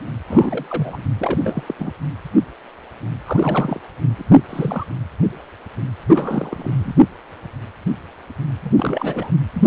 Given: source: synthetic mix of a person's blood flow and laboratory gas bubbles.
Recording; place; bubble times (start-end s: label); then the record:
Doppler ultrasound of blood flow; precordium
0.25-1.04 s: bubbles
1.19-1.39 s: bubbles
1.42-1.64 s: bubbles
1.68-1.74 s: bubbles
1.79-1.93 s: bubbles
3.24-3.80 s: bubbles
4.18-4.23 s: bubbles
4.30-4.43 s: bubbles
4.50-4.85 s: bubbles
6.08-7.02 s: bubbles
8.64-8.70 s: bubbles
8.76-9.32 s: bubbles
9.54-9.67 s: bubbles
From the record:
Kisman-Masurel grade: 332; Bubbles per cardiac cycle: rolling drumbeat, 9 or more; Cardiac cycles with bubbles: 50 to 99%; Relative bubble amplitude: moderate (0.250 to 0.450); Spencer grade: 3 (all of the cardiac periods contain showers or single bubble signals, but not dominating or overriding the cardiac motion signals); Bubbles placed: anywhere in the cardiac cycle